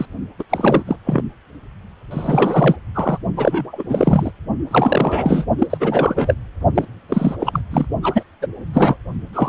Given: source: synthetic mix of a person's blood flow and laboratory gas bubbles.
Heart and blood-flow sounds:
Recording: Doppler ultrasound of blood flow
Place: precordium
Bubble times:
0.00-0.05 s: bubbles
0.39-0.43 s: bubbles
0.49-0.82 s: bubbles
0.86-0.97 s: bubbles
1.05-1.22 s: bubbles
2.10-2.76 s: bubbles
2.95-3.18 s: bubbles
3.37-3.83 s: bubbles
3.88-4.31 s: bubbles
4.71-5.46 s: bubbles
5.58-5.67 s: bubbles
5.70-5.78 s: bubbles
5.80-6.35 s: bubbles
6.75-6.85 s: bubbles
7.08-7.36 s: bubbles
7.40-7.61 s: bubbles
7.71-7.88 s: bubbles
8.03-8.22 s: bubbles
8.41-8.46 s: bubbles
8.73-8.96 s: bubbles
9.33-9.49 s: bubbles
From the record:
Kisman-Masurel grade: 343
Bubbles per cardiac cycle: rolling drumbeat, 9 or more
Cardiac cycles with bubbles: 100%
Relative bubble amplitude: loud (0.450 to 0.775)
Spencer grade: 3 (all of the cardiac periods contain showers or single bubble signals, but not dominating or overriding the cardiac motion signals)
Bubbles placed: only in the low amplitude regions of the cardiac cycle

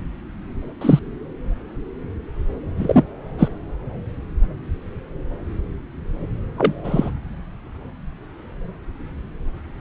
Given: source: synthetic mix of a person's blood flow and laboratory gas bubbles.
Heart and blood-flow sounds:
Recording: Doppler ultrasound of blood flow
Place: subclavian vein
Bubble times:
0.81-0.99 s: bubbles
2.77-3.03 s: bubbles
3.38-3.48 s: bubbles
6.58-6.73 s: bubbles
6.83-7.10 s: bubbles
From the record:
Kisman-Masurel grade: 123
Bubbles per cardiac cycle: 1 to 2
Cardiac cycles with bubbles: 10 to 50%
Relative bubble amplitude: loud (0.450 to 0.775)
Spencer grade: 2 (many but less than half of the cardiac periods contain bubble signals, singularly or in groups)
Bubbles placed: anywhere in the cardiac cycle

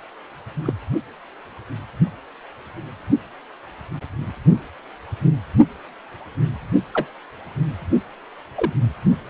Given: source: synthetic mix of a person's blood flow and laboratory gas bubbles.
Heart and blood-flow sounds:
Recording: Doppler ultrasound of blood flow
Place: precordium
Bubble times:
0.65-0.73 s: bubbles
6.93-7.08 s: bubbles
8.56-8.73 s: bubbles
From the record:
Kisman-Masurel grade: 122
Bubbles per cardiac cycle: 1 to 2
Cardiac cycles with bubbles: 10 to 50%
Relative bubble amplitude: moderate (0.250 to 0.450)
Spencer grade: 2 (many but less than half of the cardiac periods contain bubble signals, singularly or in groups)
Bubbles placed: only in the low amplitude regions of the cardiac cycle

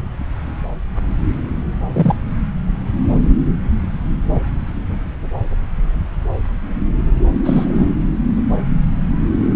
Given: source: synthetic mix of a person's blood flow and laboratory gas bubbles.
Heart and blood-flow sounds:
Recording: Doppler ultrasound of blood flow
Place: subclavian vein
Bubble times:
1.94-2.15 s: bubbles
7.45-7.91 s: bubbles
From the record:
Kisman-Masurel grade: 123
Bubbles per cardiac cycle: 1 to 2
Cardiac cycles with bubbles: 10 to 50%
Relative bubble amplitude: loud (0.450 to 0.775)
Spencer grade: 2 (many but less than half of the cardiac periods contain bubble signals, singularly or in groups)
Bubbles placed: anywhere in the cardiac cycle

